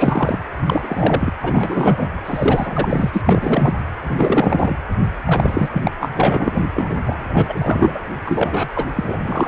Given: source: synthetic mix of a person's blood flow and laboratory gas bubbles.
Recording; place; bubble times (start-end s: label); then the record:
Doppler ultrasound of blood flow; precordium
0.00-0.39 s: bubbles
0.66-1.33 s: bubbles
1.42-2.08 s: bubbles
2.25-3.75 s: bubbles
4.06-4.76 s: bubbles
5.25-5.68 s: bubbles
5.71-5.91 s: bubbles
6.00-6.10 s: bubbles
6.14-6.63 s: bubbles
6.75-6.94 s: bubbles
7.06-7.24 s: bubbles
7.29-7.99 s: bubbles
8.25-8.69 s: bubbles
8.76-8.85 s: bubbles
8.96-9.18 s: bubbles
9.25-9.48 s: bubbles
From the record:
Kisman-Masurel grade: 343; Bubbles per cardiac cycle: rolling drumbeat, 9 or more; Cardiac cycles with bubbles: 100%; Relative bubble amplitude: loud (0.450 to 0.775); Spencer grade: 3 (all of the cardiac periods contain showers or single bubble signals, but not dominating or overriding the cardiac motion signals); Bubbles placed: anywhere in the cardiac cycle